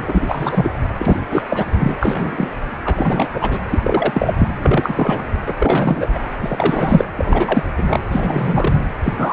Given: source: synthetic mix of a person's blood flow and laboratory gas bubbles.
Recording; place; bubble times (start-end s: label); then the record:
Doppler ultrasound of blood flow; precordium
0.07-0.70 s: bubbles
0.98-1.24 s: bubbles
1.31-1.42 s: bubbles
1.50-1.66 s: bubbles
1.77-1.97 s: bubbles
2.00-2.48 s: bubbles
2.85-3.27 s: bubbles
3.34-3.58 s: bubbles
3.71-3.79 s: bubbles
3.83-4.34 s: bubbles
4.37-4.48 s: bubbles
4.61-5.24 s: bubbles
5.46-6.08 s: bubbles
6.14-6.18 s: bubbles
6.41-7.07 s: bubbles
7.17-7.66 s: bubbles
7.78-8.00 s: bubbles
8.12-8.82 s: bubbles
9.03-9.33 s: bubbles
From the record:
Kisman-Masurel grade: 343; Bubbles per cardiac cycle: rolling drumbeat, 9 or more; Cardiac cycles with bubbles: 100%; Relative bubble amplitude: loud (0.450 to 0.775); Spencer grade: 3 (all of the cardiac periods contain showers or single bubble signals, but not dominating or overriding the cardiac motion signals); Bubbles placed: anywhere in the cardiac cycle